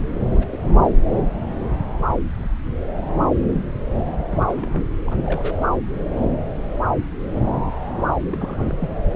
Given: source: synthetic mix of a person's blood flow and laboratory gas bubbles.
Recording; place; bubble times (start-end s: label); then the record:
Doppler ultrasound of blood flow; subclavian vein
0.35-0.58 s: bubbles
4.31-4.87 s: bubbles
5.04-5.17 s: bubbles
5.23-5.57 s: bubbles
8.26-9.08 s: bubbles
From the record:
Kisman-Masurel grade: 221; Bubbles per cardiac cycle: several, 3 to 8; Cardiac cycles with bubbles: 10 to 50%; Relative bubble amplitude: barely perceptible (0.100 to 0.250); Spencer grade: 2 (many but less than half of the cardiac periods contain bubble signals, singularly or in groups); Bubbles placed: anywhere in the cardiac cycle